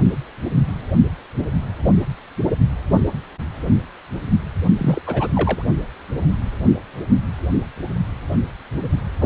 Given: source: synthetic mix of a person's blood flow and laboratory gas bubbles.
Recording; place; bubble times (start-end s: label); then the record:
Doppler ultrasound of blood flow; precordium
4.79-5.01 s: bubbles
5.07-5.28 s: bubbles
5.35-5.62 s: bubbles
9.19-9.26 s: bubbles
From the record:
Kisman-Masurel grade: 222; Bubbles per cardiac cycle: several, 3 to 8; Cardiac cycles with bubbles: 10 to 50%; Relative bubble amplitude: moderate (0.250 to 0.450); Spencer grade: 2 (many but less than half of the cardiac periods contain bubble signals, singularly or in groups); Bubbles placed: only in the low amplitude regions of the cardiac cycle